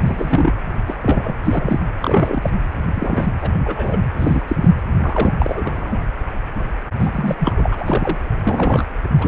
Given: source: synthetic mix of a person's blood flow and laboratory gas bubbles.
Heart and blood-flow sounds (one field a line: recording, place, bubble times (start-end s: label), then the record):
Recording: Doppler ultrasound of blood flow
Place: precordium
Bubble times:
0.05-0.52 s: bubbles
0.88-0.96 s: bubbles
1.02-1.34 s: bubbles
1.44-1.79 s: bubbles
2.02-2.50 s: bubbles
2.96-3.27 s: bubbles
3.42-3.50 s: bubbles
3.64-3.99 s: bubbles
4.14-4.41 s: bubbles
4.47-4.55 s: bubbles
4.61-4.70 s: bubbles
5.03-5.32 s: bubbles
5.38-6.01 s: bubbles
6.98-7.35 s: bubbles
7.39-8.18 s: bubbles
8.41-8.87 s: bubbles
9.17-9.28 s: bubbles
From the record:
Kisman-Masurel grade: 232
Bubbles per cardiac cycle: several, 3 to 8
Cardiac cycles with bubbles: 50 to 99%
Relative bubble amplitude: moderate (0.250 to 0.450)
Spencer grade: 3 (all of the cardiac periods contain showers or single bubble signals, but not dominating or overriding the cardiac motion signals)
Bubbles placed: anywhere in the cardiac cycle